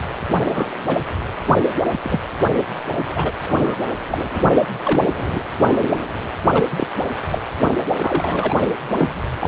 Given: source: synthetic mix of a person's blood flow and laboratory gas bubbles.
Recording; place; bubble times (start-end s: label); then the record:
Doppler ultrasound of blood flow; precordium
0.29-0.98 s: bubbles
1.48-1.54 s: bubbles
1.92-2.20 s: bubbles
3.09-3.32 s: bubbles
3.44-3.78 s: bubbles
4.08-4.18 s: bubbles
4.35-4.41 s: bubbles
4.85-5.06 s: bubbles
5.18-5.41 s: bubbles
5.58-5.75 s: bubbles
6.53-6.65 s: bubbles
6.70-6.87 s: bubbles
7.31-7.39 s: bubbles
7.61-7.75 s: bubbles
7.99-8.55 s: bubbles
8.94-9.22 s: bubbles
9.41-9.48 s: bubbles
From the record:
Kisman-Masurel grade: 232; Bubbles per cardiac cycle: several, 3 to 8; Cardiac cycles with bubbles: 50 to 99%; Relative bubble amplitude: moderate (0.250 to 0.450); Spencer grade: 3 (all of the cardiac periods contain showers or single bubble signals, but not dominating or overriding the cardiac motion signals); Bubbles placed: anywhere in the cardiac cycle